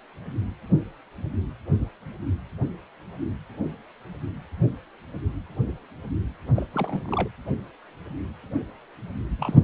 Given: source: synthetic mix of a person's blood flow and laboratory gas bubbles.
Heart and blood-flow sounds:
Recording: Doppler ultrasound of blood flow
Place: precordium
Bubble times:
6.55-6.67 s: bubbles
6.73-7.29 s: bubbles
9.39-9.55 s: bubbles
From the record:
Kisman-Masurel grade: 212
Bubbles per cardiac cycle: several, 3 to 8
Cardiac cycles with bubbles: 1 to 10%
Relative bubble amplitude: moderate (0.250 to 0.450)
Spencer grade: 1 (occasional bubble signal discernible with the cardiac motion signal, with majority of cardiac periods free of bubbles)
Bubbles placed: anywhere in the cardiac cycle

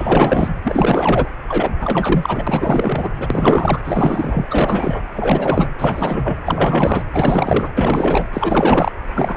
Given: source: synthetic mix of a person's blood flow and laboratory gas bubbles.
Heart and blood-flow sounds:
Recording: Doppler ultrasound of blood flow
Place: precordium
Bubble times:
0.00-0.50 s: bubbles
0.64-1.28 s: bubbles
1.48-1.75 s: bubbles
1.81-3.09 s: bubbles
3.17-3.27 s: bubbles
3.30-3.80 s: bubbles
3.85-4.47 s: bubbles
4.51-5.02 s: bubbles
5.12-5.68 s: bubbles
5.78-6.40 s: bubbles
6.46-7.03 s: bubbles
7.12-7.68 s: bubbles
7.77-8.30 s: bubbles
8.33-8.92 s: bubbles
9.14-9.36 s: bubbles
From the record:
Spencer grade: 4 (maximum detectable bubble signal sounding continuously throughout systole and diastole of every cardiac period, and overriding the amplitude of the normal cardiac signals)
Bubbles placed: anywhere in the cardiac cycle

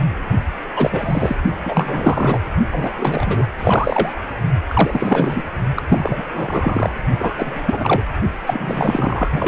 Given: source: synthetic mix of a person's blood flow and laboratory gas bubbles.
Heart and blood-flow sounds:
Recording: Doppler ultrasound of blood flow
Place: precordium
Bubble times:
0.76-1.35 s: bubbles
1.63-2.41 s: bubbles
2.70-3.46 s: bubbles
3.57-4.19 s: bubbles
4.67-5.42 s: bubbles
5.76-5.83 s: bubbles
5.88-6.25 s: bubbles
6.33-6.91 s: bubbles
7.19-8.03 s: bubbles
8.46-9.29 s: bubbles
9.32-9.48 s: bubbles
From the record:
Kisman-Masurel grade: 343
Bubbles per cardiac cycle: rolling drumbeat, 9 or more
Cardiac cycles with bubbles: 100%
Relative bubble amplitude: loud (0.450 to 0.775)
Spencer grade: 3 (all of the cardiac periods contain showers or single bubble signals, but not dominating or overriding the cardiac motion signals)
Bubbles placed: only in the low amplitude regions of the cardiac cycle

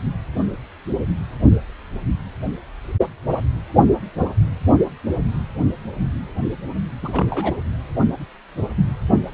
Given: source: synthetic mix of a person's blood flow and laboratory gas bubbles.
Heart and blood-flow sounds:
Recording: Doppler ultrasound of blood flow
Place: precordium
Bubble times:
7.02-7.56 s: bubbles
From the record:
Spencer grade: 2 (many but less than half of the cardiac periods contain bubble signals, singularly or in groups)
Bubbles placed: only in the low amplitude regions of the cardiac cycle

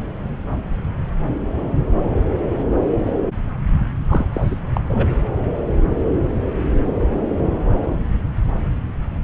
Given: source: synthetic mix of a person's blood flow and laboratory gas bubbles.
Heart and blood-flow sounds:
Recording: Doppler ultrasound of blood flow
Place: subclavian vein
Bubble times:
4.08-4.24 s: bubbles
4.33-4.61 s: bubbles
4.73-4.81 s: bubbles
4.88-5.07 s: bubbles
From the record:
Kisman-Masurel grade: 212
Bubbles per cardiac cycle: several, 3 to 8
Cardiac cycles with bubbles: 1 to 10%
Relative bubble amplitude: moderate (0.250 to 0.450)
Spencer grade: 1 (occasional bubble signal discernible with the cardiac motion signal, with majority of cardiac periods free of bubbles)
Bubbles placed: anywhere in the cardiac cycle

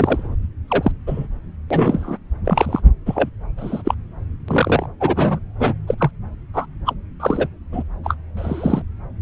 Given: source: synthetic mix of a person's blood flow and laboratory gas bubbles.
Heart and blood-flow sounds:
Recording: Doppler ultrasound of blood flow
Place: subclavian vein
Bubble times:
0.00-0.35 s: bubbles
0.68-0.91 s: bubbles
1.06-1.27 s: bubbles
1.70-2.18 s: bubbles
2.45-2.81 s: bubbles
3.06-3.29 s: bubbles
3.56-3.82 s: bubbles
3.85-3.94 s: bubbles
4.48-4.86 s: bubbles
5.00-5.39 s: bubbles
5.58-5.74 s: bubbles
5.87-6.10 s: bubbles
6.53-6.66 s: bubbles
6.85-6.93 s: bubbles
7.19-7.47 s: bubbles
7.72-7.83 s: bubbles
8.04-8.15 s: bubbles
8.37-8.82 s: bubbles
From the record:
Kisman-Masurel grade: 243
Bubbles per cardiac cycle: several, 3 to 8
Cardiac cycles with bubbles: 100%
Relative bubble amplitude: loud (0.450 to 0.775)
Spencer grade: 3 (all of the cardiac periods contain showers or single bubble signals, but not dominating or overriding the cardiac motion signals)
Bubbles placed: anywhere in the cardiac cycle

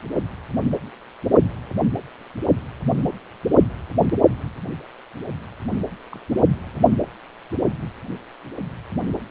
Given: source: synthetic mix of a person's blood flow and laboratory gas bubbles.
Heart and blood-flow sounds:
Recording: Doppler ultrasound of blood flow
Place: precordium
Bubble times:
6.12-6.19 s: bubbles
From the record:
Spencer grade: 2 (many but less than half of the cardiac periods contain bubble signals, singularly or in groups)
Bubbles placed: only in the low amplitude regions of the cardiac cycle

